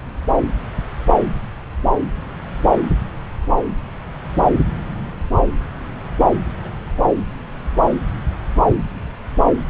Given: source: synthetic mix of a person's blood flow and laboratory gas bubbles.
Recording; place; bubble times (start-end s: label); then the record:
Doppler ultrasound of blood flow; subclavian vein
0.05-0.11 s: bubbles
6.61-6.71 s: bubbles
From the record:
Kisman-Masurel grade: 121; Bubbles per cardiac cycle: 1 to 2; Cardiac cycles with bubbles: 10 to 50%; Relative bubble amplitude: barely perceptible (0.100 to 0.250); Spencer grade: 2 (many but less than half of the cardiac periods contain bubble signals, singularly or in groups); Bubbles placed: anywhere in the cardiac cycle